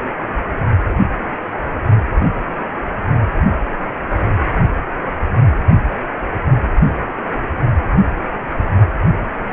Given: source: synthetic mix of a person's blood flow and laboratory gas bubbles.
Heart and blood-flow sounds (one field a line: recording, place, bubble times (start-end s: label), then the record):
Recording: Doppler ultrasound of blood flow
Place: precordium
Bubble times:
no bubbles
From the record:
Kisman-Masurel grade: 000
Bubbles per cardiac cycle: 0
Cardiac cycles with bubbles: 0%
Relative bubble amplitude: no bubbles discernible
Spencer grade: 0 (complete lack of bubble signals)